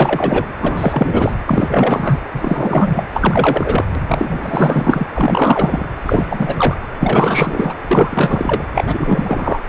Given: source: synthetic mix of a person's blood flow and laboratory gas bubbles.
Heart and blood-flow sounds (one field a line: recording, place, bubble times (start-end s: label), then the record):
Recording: Doppler ultrasound of blood flow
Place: precordium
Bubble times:
0.00-0.46 s: bubbles
0.59-1.34 s: bubbles
1.46-2.21 s: bubbles
2.33-3.04 s: bubbles
3.12-3.84 s: bubbles
4.08-5.06 s: bubbles
5.16-5.86 s: bubbles
6.06-6.77 s: bubbles
6.99-7.75 s: bubbles
7.81-8.64 s: bubbles
8.74-9.60 s: bubbles
From the record:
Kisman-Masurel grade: 444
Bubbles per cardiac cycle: continuous sound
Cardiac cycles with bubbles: 100%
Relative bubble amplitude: maximal (0.775 to 0.999)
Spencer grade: 4 (maximum detectable bubble signal sounding continuously throughout systole and diastole of every cardiac period, and overriding the amplitude of the normal cardiac signals)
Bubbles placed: anywhere in the cardiac cycle